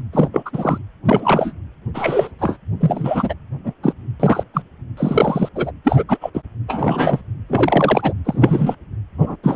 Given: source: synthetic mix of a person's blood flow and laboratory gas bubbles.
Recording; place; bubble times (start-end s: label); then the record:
Doppler ultrasound of blood flow; precordium
0.12-0.29 s: bubbles
0.33-0.42 s: bubbles
0.46-0.78 s: bubbles
1.05-1.53 s: bubbles
1.94-2.31 s: bubbles
2.39-2.56 s: bubbles
2.79-3.34 s: bubbles
3.64-3.73 s: bubbles
3.82-3.93 s: bubbles
4.19-4.43 s: bubbles
4.53-4.62 s: bubbles
4.97-5.49 s: bubbles
5.55-5.71 s: bubbles
5.84-6.03 s: bubbles
6.08-6.18 s: bubbles
6.21-6.30 s: bubbles
6.33-6.42 s: bubbles
6.67-7.21 s: bubbles
7.48-8.13 s: bubbles
8.25-8.75 s: bubbles
9.18-9.36 s: bubbles
9.43-9.56 s: bubbles
From the record:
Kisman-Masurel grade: 243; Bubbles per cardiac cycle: several, 3 to 8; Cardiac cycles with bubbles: 100%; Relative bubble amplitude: loud (0.450 to 0.775); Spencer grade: 3 (all of the cardiac periods contain showers or single bubble signals, but not dominating or overriding the cardiac motion signals); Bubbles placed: anywhere in the cardiac cycle